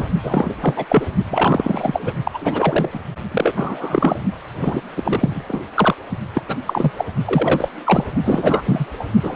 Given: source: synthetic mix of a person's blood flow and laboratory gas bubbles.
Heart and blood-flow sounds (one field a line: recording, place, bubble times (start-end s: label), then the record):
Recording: Doppler ultrasound of blood flow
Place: precordium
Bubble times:
0.00-0.08 s: bubbles
0.22-0.55 s: bubbles
0.61-0.86 s: bubbles
0.89-1.06 s: bubbles
1.29-2.13 s: bubbles
2.23-2.38 s: bubbles
2.41-2.89 s: bubbles
2.93-3.00 s: bubbles
3.31-4.18 s: bubbles
4.55-4.83 s: bubbles
4.96-5.45 s: bubbles
5.48-5.62 s: bubbles
5.76-5.95 s: bubbles
6.33-6.43 s: bubbles
6.48-6.57 s: bubbles
6.67-6.92 s: bubbles
6.98-7.05 s: bubbles
7.25-7.69 s: bubbles
7.85-8.04 s: bubbles
8.24-8.62 s: bubbles
8.66-8.85 s: bubbles
8.99-9.05 s: bubbles
9.23-9.36 s: bubbles
From the record:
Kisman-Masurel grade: 343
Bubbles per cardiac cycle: rolling drumbeat, 9 or more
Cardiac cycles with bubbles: 100%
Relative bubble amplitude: loud (0.450 to 0.775)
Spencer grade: 3 (all of the cardiac periods contain showers or single bubble signals, but not dominating or overriding the cardiac motion signals)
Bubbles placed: only in the low amplitude regions of the cardiac cycle